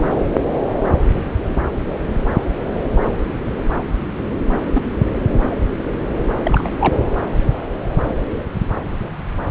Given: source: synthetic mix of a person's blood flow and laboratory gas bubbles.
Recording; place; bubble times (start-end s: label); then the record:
Doppler ultrasound of blood flow; subclavian vein
1.40-1.66 s: bubbles
4.74-4.82 s: bubbles
6.44-6.69 s: bubbles
6.79-6.95 s: bubbles
From the record:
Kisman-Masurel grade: 122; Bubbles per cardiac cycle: 1 to 2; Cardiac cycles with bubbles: 10 to 50%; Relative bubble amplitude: moderate (0.250 to 0.450); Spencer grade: 2 (many but less than half of the cardiac periods contain bubble signals, singularly or in groups); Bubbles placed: anywhere in the cardiac cycle